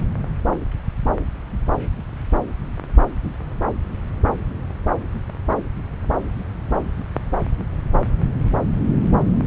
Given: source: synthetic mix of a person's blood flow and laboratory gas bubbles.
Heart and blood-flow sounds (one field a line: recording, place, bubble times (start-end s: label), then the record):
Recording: Doppler ultrasound of blood flow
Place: subclavian vein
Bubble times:
no bubbles
From the record:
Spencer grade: 0 (complete lack of bubble signals)